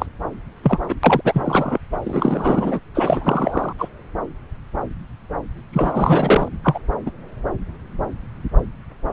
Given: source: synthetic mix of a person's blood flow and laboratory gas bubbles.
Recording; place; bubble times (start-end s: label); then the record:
Doppler ultrasound of blood flow; subclavian vein
0.00-0.06 s: bubbles
0.63-0.79 s: bubbles
0.89-0.95 s: bubbles
1.03-1.21 s: bubbles
1.24-1.79 s: bubbles
1.92-1.98 s: bubbles
2.04-2.79 s: bubbles
2.94-3.73 s: bubbles
3.78-3.89 s: bubbles
5.72-6.48 s: bubbles
6.63-6.79 s: bubbles
7.05-7.11 s: bubbles
From the record:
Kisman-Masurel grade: 333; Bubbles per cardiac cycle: rolling drumbeat, 9 or more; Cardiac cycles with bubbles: 50 to 99%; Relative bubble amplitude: loud (0.450 to 0.775); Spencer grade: 3 (all of the cardiac periods contain showers or single bubble signals, but not dominating or overriding the cardiac motion signals); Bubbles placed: anywhere in the cardiac cycle